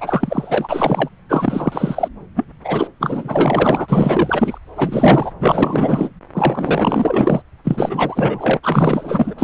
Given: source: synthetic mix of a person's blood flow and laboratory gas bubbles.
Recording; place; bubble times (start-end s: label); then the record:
Doppler ultrasound of blood flow; subclavian vein
0.00-1.10 s: bubbles
1.29-2.08 s: bubbles
2.35-2.44 s: bubbles
2.64-2.88 s: bubbles
3.00-4.58 s: bubbles
4.76-5.31 s: bubbles
5.41-6.09 s: bubbles
6.34-7.42 s: bubbles
7.64-8.57 s: bubbles
8.62-9.34 s: bubbles
9.38-9.44 s: bubbles
From the record:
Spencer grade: 4 (maximum detectable bubble signal sounding continuously throughout systole and diastole of every cardiac period, and overriding the amplitude of the normal cardiac signals); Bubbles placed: anywhere in the cardiac cycle